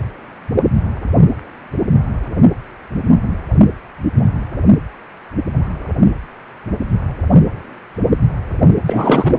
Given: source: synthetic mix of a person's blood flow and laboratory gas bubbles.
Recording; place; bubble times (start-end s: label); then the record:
Doppler ultrasound of blood flow; precordium
8.85-9.36 s: bubbles
From the record:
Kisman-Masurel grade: 223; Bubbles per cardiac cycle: several, 3 to 8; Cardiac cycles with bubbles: 10 to 50%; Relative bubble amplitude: loud (0.450 to 0.775); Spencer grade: 2 (many but less than half of the cardiac periods contain bubble signals, singularly or in groups); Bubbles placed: anywhere in the cardiac cycle